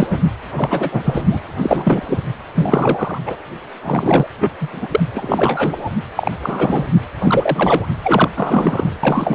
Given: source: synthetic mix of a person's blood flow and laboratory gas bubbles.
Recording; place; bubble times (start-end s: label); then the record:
Doppler ultrasound of blood flow; precordium
0.00-0.08 s: bubbles
0.10-0.20 s: bubbles
0.55-1.24 s: bubbles
1.30-1.40 s: bubbles
1.62-2.03 s: bubbles
2.08-2.19 s: bubbles
2.54-3.19 s: bubbles
3.26-3.36 s: bubbles
3.82-4.26 s: bubbles
4.41-4.50 s: bubbles
4.60-4.68 s: bubbles
4.72-4.87 s: bubbles
4.91-5.00 s: bubbles
5.14-5.89 s: bubbles
6.16-6.32 s: bubbles
6.42-6.87 s: bubbles
7.21-7.85 s: bubbles
8.04-8.29 s: bubbles
8.37-8.91 s: bubbles
9.03-9.35 s: bubbles
From the record:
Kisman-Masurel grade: 343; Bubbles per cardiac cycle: rolling drumbeat, 9 or more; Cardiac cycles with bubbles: 100%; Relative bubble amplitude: loud (0.450 to 0.775); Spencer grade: 3 (all of the cardiac periods contain showers or single bubble signals, but not dominating or overriding the cardiac motion signals); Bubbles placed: anywhere in the cardiac cycle